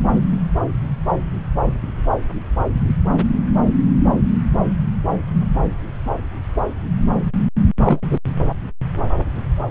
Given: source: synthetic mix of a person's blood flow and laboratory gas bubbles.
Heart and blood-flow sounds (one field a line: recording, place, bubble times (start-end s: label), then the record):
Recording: Doppler ultrasound of blood flow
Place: subclavian vein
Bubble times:
7.85-8.00 s: bubbles
8.10-8.19 s: bubbles
From the record:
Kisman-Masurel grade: 113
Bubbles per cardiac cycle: 1 to 2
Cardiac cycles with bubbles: 1 to 10%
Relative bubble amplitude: loud (0.450 to 0.775)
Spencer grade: 1 (occasional bubble signal discernible with the cardiac motion signal, with majority of cardiac periods free of bubbles)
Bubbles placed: anywhere in the cardiac cycle